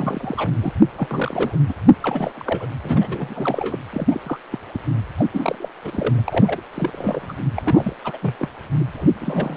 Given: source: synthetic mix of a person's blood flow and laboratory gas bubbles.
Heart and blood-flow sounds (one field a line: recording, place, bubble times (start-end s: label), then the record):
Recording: Doppler ultrasound of blood flow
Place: precordium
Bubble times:
0.00-0.51 s: bubbles
0.61-0.73 s: bubbles
0.97-1.57 s: bubbles
1.69-1.73 s: bubbles
2.02-2.32 s: bubbles
2.35-2.67 s: bubbles
2.83-3.79 s: bubbles
3.91-4.21 s: bubbles
4.23-4.40 s: bubbles
4.51-4.58 s: bubbles
4.74-4.78 s: bubbles
5.17-5.26 s: bubbles
5.33-5.69 s: bubbles
5.84-6.62 s: bubbles
6.74-7.36 s: bubbles
7.56-7.94 s: bubbles
8.04-8.18 s: bubbles
8.21-8.36 s: bubbles
8.39-8.50 s: bubbles
8.79-8.84 s: bubbles
8.96-9.05 s: bubbles
9.21-9.57 s: bubbles
From the record:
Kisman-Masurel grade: 332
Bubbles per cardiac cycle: rolling drumbeat, 9 or more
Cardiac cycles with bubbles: 50 to 99%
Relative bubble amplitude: moderate (0.250 to 0.450)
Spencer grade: 3 (all of the cardiac periods contain showers or single bubble signals, but not dominating or overriding the cardiac motion signals)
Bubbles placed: anywhere in the cardiac cycle